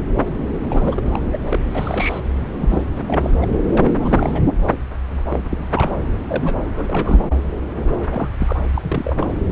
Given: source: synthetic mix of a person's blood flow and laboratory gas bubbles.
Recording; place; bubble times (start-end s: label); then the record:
Doppler ultrasound of blood flow; subclavian vein
0.70-1.20 s: bubbles
1.32-1.38 s: bubbles
1.45-1.59 s: bubbles
1.74-2.20 s: bubbles
2.58-2.82 s: bubbles
3.07-3.31 s: bubbles
3.40-3.60 s: bubbles
3.64-3.96 s: bubbles
4.01-4.42 s: bubbles
5.29-5.44 s: bubbles
5.50-5.58 s: bubbles
5.74-5.91 s: bubbles
6.29-6.55 s: bubbles
6.75-7.28 s: bubbles
8.10-8.29 s: bubbles
8.39-8.62 s: bubbles
8.74-9.26 s: bubbles
From the record:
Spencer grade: 3 (all of the cardiac periods contain showers or single bubble signals, but not dominating or overriding the cardiac motion signals); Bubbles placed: anywhere in the cardiac cycle